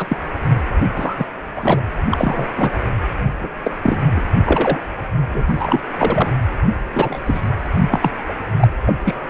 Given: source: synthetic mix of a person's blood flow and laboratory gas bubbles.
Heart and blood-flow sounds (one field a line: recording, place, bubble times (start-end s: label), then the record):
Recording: Doppler ultrasound of blood flow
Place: precordium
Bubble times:
0.00-0.17 s: bubbles
0.96-1.27 s: bubbles
1.56-1.82 s: bubbles
2.10-2.48 s: bubbles
2.56-2.73 s: bubbles
3.39-3.50 s: bubbles
3.64-3.71 s: bubbles
3.82-3.98 s: bubbles
4.15-4.21 s: bubbles
4.44-4.82 s: bubbles
5.33-5.44 s: bubbles
5.46-5.81 s: bubbles
5.97-6.32 s: bubbles
6.95-7.20 s: bubbles
7.25-7.48 s: bubbles
7.78-8.12 s: bubbles
8.29-8.34 s: bubbles
8.59-8.68 s: bubbles
8.86-8.95 s: bubbles
9.04-9.15 s: bubbles
From the record:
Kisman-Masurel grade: 243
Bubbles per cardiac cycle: several, 3 to 8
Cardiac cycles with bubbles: 100%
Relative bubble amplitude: loud (0.450 to 0.775)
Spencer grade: 3 (all of the cardiac periods contain showers or single bubble signals, but not dominating or overriding the cardiac motion signals)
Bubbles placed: anywhere in the cardiac cycle